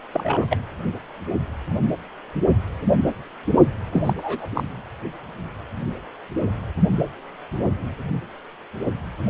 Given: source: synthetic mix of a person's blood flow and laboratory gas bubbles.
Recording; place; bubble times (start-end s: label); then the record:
Doppler ultrasound of blood flow; precordium
0.12-0.57 s: bubbles
3.92-4.13 s: bubbles
4.17-4.47 s: bubbles
4.54-4.63 s: bubbles
From the record:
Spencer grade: 2 (many but less than half of the cardiac periods contain bubble signals, singularly or in groups); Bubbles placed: only in the low amplitude regions of the cardiac cycle